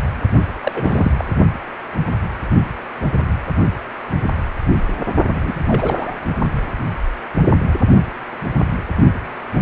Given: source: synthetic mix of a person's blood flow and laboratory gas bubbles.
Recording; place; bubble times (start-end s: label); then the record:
Doppler ultrasound of blood flow; precordium
0.63-1.11 s: bubbles
1.17-1.24 s: bubbles
5.34-5.59 s: bubbles
5.67-6.15 s: bubbles
From the record:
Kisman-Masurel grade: 222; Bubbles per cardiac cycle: several, 3 to 8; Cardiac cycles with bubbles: 10 to 50%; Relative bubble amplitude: moderate (0.250 to 0.450); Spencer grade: 2 (many but less than half of the cardiac periods contain bubble signals, singularly or in groups); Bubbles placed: only in the low amplitude regions of the cardiac cycle